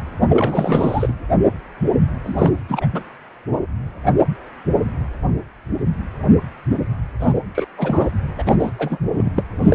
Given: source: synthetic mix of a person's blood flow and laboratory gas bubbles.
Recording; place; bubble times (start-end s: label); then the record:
Doppler ultrasound of blood flow; precordium
0.29-1.13 s: bubbles
2.23-2.52 s: bubbles
2.69-2.87 s: bubbles
2.93-3.03 s: bubbles
7.20-7.40 s: bubbles
7.54-7.66 s: bubbles
7.77-8.07 s: bubbles
8.38-8.71 s: bubbles
8.79-8.98 s: bubbles
9.12-9.30 s: bubbles
9.35-9.44 s: bubbles
9.62-9.75 s: bubbles
From the record:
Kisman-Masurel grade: 332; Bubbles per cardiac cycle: rolling drumbeat, 9 or more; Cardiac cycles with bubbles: 50 to 99%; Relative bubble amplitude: moderate (0.250 to 0.450); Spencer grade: 3 (all of the cardiac periods contain showers or single bubble signals, but not dominating or overriding the cardiac motion signals); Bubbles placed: anywhere in the cardiac cycle